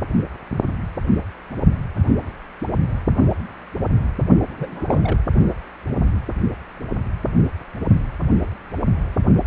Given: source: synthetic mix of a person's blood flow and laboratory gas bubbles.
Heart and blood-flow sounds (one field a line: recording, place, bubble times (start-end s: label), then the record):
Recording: Doppler ultrasound of blood flow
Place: precordium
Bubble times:
4.54-5.19 s: bubbles
From the record:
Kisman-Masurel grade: 221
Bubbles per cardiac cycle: several, 3 to 8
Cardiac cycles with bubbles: 10 to 50%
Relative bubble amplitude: barely perceptible (0.100 to 0.250)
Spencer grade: 2 (many but less than half of the cardiac periods contain bubble signals, singularly or in groups)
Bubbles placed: only in the low amplitude regions of the cardiac cycle